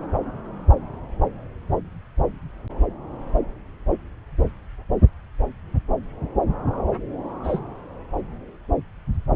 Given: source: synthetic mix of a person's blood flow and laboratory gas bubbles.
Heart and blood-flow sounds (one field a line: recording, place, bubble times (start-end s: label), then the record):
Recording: Doppler ultrasound of blood flow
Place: subclavian vein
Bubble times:
7.44-7.60 s: bubbles
From the record:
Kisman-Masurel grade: 111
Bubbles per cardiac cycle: 1 to 2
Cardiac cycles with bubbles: 1 to 10%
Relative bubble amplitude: barely perceptible (0.100 to 0.250)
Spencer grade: 1 (occasional bubble signal discernible with the cardiac motion signal, with majority of cardiac periods free of bubbles)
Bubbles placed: anywhere in the cardiac cycle